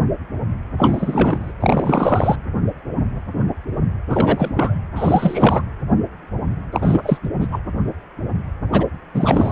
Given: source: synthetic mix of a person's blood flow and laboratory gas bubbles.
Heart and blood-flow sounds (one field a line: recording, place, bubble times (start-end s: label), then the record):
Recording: Doppler ultrasound of blood flow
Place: precordium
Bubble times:
0.77-1.53 s: bubbles
1.60-2.35 s: bubbles
4.09-4.83 s: bubbles
4.96-5.62 s: bubbles
6.72-7.17 s: bubbles
7.23-7.28 s: bubbles
7.41-7.47 s: bubbles
7.51-7.61 s: bubbles
8.72-8.86 s: bubbles
9.14-9.52 s: bubbles
From the record:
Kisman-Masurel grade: 333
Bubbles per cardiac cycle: rolling drumbeat, 9 or more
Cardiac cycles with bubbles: 50 to 99%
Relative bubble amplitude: loud (0.450 to 0.775)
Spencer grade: 3 (all of the cardiac periods contain showers or single bubble signals, but not dominating or overriding the cardiac motion signals)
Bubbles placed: anywhere in the cardiac cycle